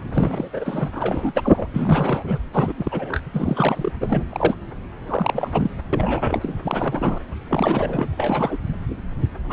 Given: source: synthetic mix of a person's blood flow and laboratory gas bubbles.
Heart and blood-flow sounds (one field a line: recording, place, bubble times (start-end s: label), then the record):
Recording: Doppler ultrasound of blood flow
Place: subclavian vein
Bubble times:
0.14-0.91 s: bubbles
0.95-1.67 s: bubbles
1.73-2.38 s: bubbles
2.52-2.73 s: bubbles
2.77-3.21 s: bubbles
3.31-3.92 s: bubbles
4.00-4.24 s: bubbles
4.29-4.54 s: bubbles
5.08-5.70 s: bubbles
5.92-6.56 s: bubbles
6.62-7.20 s: bubbles
7.50-8.09 s: bubbles
8.16-8.59 s: bubbles
9.49-9.53 s: bubbles
From the record:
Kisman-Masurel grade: 342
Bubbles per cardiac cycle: rolling drumbeat, 9 or more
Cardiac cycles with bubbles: 100%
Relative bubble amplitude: moderate (0.250 to 0.450)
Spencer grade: 3 (all of the cardiac periods contain showers or single bubble signals, but not dominating or overriding the cardiac motion signals)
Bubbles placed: anywhere in the cardiac cycle